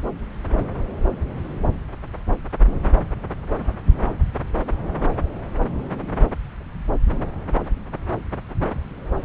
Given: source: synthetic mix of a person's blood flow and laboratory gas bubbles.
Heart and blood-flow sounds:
Doppler ultrasound of blood flow; subclavian vein
no bubbles
From the record:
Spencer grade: 0 (complete lack of bubble signals)

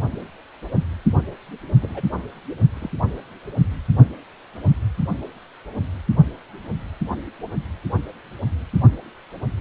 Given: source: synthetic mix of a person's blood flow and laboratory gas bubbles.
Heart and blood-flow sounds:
Doppler ultrasound of blood flow; precordium
1.81-2.06 s: bubbles
2.75-2.89 s: bubbles
From the record:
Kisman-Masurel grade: 211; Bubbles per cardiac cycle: several, 3 to 8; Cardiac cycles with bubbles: 1 to 10%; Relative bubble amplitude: barely perceptible (0.100 to 0.250); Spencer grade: 1 (occasional bubble signal discernible with the cardiac motion signal, with majority of cardiac periods free of bubbles); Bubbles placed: only in the low amplitude regions of the cardiac cycle

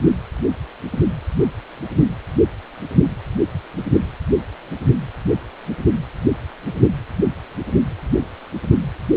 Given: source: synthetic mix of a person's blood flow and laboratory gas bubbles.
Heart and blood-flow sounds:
Doppler ultrasound of blood flow; precordium
no bubbles
From the record:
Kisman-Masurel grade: 000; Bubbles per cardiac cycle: 0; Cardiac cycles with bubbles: 0%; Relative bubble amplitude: no bubbles discernible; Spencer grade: 0 (complete lack of bubble signals)

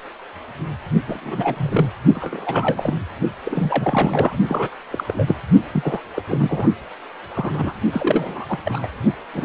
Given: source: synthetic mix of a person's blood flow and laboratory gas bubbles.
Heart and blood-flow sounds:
Doppler ultrasound of blood flow; precordium
1.08-1.89 s: bubbles
2.15-2.98 s: bubbles
3.44-4.38 s: bubbles
4.49-4.69 s: bubbles
4.91-5.04 s: bubbles
5.08-5.36 s: bubbles
5.71-6.03 s: bubbles
6.16-6.23 s: bubbles
6.28-6.72 s: bubbles
7.34-7.73 s: bubbles
7.92-8.59 s: bubbles
8.64-8.88 s: bubbles
9.33-9.45 s: bubbles
From the record:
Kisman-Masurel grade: 332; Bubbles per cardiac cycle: rolling drumbeat, 9 or more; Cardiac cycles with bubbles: 50 to 99%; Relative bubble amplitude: moderate (0.250 to 0.450); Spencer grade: 3 (all of the cardiac periods contain showers or single bubble signals, but not dominating or overriding the cardiac motion signals); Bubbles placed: only in the low amplitude regions of the cardiac cycle

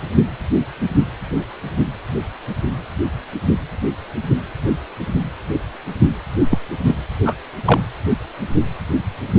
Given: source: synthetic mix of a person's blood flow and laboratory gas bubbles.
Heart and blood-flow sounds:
Doppler ultrasound of blood flow; precordium
6.50-6.58 s: bubbles
6.86-6.95 s: bubbles
7.25-7.36 s: bubbles
7.65-7.81 s: bubbles
From the record:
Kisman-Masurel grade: 123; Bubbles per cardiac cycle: 1 to 2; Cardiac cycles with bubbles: 10 to 50%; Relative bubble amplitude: loud (0.450 to 0.775); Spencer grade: 2 (many but less than half of the cardiac periods contain bubble signals, singularly or in groups); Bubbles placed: anywhere in the cardiac cycle

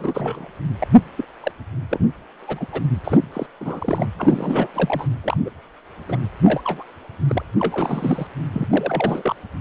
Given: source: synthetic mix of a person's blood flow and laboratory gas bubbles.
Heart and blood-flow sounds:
Doppler ultrasound of blood flow; precordium
0.00-0.48 s: bubbles
0.80-0.86 s: bubbles
1.18-1.24 s: bubbles
1.43-1.51 s: bubbles
1.89-1.99 s: bubbles
2.47-2.67 s: bubbles
2.72-2.82 s: bubbles
3.04-3.29 s: bubbles
3.33-3.46 s: bubbles
3.60-4.06 s: bubbles
4.18-4.68 s: bubbles
4.73-5.07 s: bubbles
5.23-5.37 s: bubbles
5.44-5.50 s: bubbles
6.08-6.17 s: bubbles
6.44-6.61 s: bubbles
6.64-6.83 s: bubbles
7.29-7.44 s: bubbles
7.59-8.27 s: bubbles
8.53-8.67 s: bubbles
8.70-9.36 s: bubbles
From the record:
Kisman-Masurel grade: 242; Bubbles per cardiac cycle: several, 3 to 8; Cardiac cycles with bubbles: 100%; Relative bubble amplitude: moderate (0.250 to 0.450); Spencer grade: 3 (all of the cardiac periods contain showers or single bubble signals, but not dominating or overriding the cardiac motion signals); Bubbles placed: anywhere in the cardiac cycle

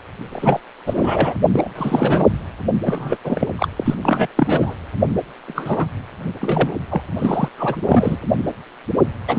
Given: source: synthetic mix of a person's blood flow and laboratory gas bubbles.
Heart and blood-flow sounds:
Doppler ultrasound of blood flow; precordium
0.32-0.60 s: bubbles
0.86-1.35 s: bubbles
1.52-1.69 s: bubbles
1.75-2.25 s: bubbles
2.84-3.17 s: bubbles
3.24-3.48 s: bubbles
3.57-3.69 s: bubbles
3.76-3.94 s: bubbles
4.03-4.27 s: bubbles
4.37-4.75 s: bubbles
5.47-5.87 s: bubbles
6.41-6.72 s: bubbles
6.90-7.06 s: bubbles
7.19-7.49 s: bubbles
7.58-7.77 s: bubbles
7.83-8.18 s: bubbles
9.27-9.39 s: bubbles
From the record:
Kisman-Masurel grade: 343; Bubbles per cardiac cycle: rolling drumbeat, 9 or more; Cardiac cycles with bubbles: 100%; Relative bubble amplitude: loud (0.450 to 0.775); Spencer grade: 3 (all of the cardiac periods contain showers or single bubble signals, but not dominating or overriding the cardiac motion signals); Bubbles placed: anywhere in the cardiac cycle

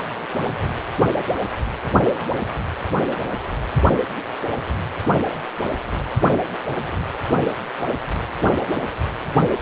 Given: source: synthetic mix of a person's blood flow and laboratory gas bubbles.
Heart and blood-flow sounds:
Doppler ultrasound of blood flow; precordium
8.61-8.83 s: bubbles
9.34-9.38 s: bubbles
From the record:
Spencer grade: 1 (occasional bubble signal discernible with the cardiac motion signal, with majority of cardiac periods free of bubbles); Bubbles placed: anywhere in the cardiac cycle

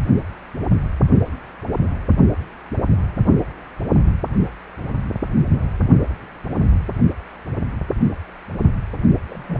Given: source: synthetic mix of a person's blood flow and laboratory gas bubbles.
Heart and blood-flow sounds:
Doppler ultrasound of blood flow; precordium
9.29-9.60 s: bubbles
From the record:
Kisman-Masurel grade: 111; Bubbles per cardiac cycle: 1 to 2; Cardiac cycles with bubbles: 1 to 10%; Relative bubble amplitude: barely perceptible (0.100 to 0.250); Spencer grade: 1 (occasional bubble signal discernible with the cardiac motion signal, with majority of cardiac periods free of bubbles); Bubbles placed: only in the low amplitude regions of the cardiac cycle

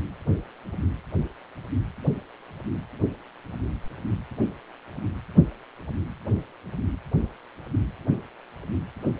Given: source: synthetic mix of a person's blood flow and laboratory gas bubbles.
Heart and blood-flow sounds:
Doppler ultrasound of blood flow; precordium
no bubbles
From the record:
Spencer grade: 0 (complete lack of bubble signals)

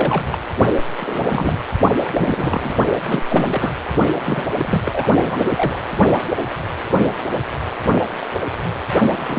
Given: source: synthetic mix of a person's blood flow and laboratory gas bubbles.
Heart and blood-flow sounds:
Doppler ultrasound of blood flow; precordium
0.00-0.24 s: bubbles
0.32-0.38 s: bubbles
1.00-1.57 s: bubbles
2.02-2.11 s: bubbles
2.13-2.75 s: bubbles
3.05-3.24 s: bubbles
3.29-3.72 s: bubbles
4.18-4.49 s: bubbles
4.59-5.08 s: bubbles
5.15-5.52 s: bubbles
5.56-5.79 s: bubbles
9.17-9.38 s: bubbles
From the record:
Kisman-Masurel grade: 332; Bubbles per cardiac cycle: rolling drumbeat, 9 or more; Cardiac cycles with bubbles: 50 to 99%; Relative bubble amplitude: moderate (0.250 to 0.450); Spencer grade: 3 (all of the cardiac periods contain showers or single bubble signals, but not dominating or overriding the cardiac motion signals); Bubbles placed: only in the low amplitude regions of the cardiac cycle

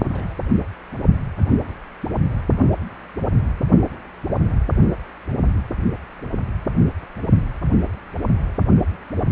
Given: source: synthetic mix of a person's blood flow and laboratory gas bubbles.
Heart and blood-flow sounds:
Doppler ultrasound of blood flow; precordium
0.12-0.34 s: bubbles
From the record:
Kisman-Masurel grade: 111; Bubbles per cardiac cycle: 1 to 2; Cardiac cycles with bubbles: 1 to 10%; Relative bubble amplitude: barely perceptible (0.100 to 0.250); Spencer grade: 1 (occasional bubble signal discernible with the cardiac motion signal, with majority of cardiac periods free of bubbles); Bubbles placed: only in the low amplitude regions of the cardiac cycle

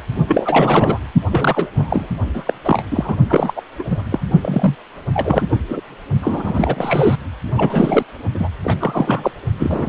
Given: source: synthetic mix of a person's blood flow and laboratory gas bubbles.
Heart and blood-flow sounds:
Doppler ultrasound of blood flow; precordium
0.27-0.99 s: bubbles
1.30-1.68 s: bubbles
1.77-2.08 s: bubbles
2.33-2.54 s: bubbles
2.64-2.82 s: bubbles
2.90-3.15 s: bubbles
3.29-3.54 s: bubbles
3.56-3.61 s: bubbles
3.79-3.84 s: bubbles
3.90-4.03 s: bubbles
4.09-4.20 s: bubbles
4.41-4.75 s: bubbles
5.13-5.46 s: bubbles
5.50-5.59 s: bubbles
5.68-5.80 s: bubbles
6.21-7.16 s: bubbles
7.55-8.03 s: bubbles
8.35-8.48 s: bubbles
8.63-8.77 s: bubbles
8.80-9.31 s: bubbles
9.59-9.89 s: bubbles
From the record:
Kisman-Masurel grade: 343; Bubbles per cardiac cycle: rolling drumbeat, 9 or more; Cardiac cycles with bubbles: 100%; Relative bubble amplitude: loud (0.450 to 0.775); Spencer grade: 3 (all of the cardiac periods contain showers or single bubble signals, but not dominating or overriding the cardiac motion signals); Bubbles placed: only in the low amplitude regions of the cardiac cycle

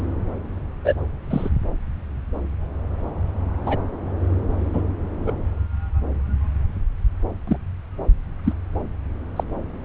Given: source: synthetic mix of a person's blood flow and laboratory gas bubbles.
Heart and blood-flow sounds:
Doppler ultrasound of blood flow; subclavian vein
0.84-0.94 s: bubbles
1.30-1.50 s: bubbles
3.65-3.77 s: bubbles
4.73-4.83 s: bubbles
5.26-5.32 s: bubbles
7.47-7.58 s: bubbles
8.44-8.53 s: bubbles
9.36-9.44 s: bubbles
From the record:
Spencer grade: 2 (many but less than half of the cardiac periods contain bubble signals, singularly or in groups); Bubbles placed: anywhere in the cardiac cycle

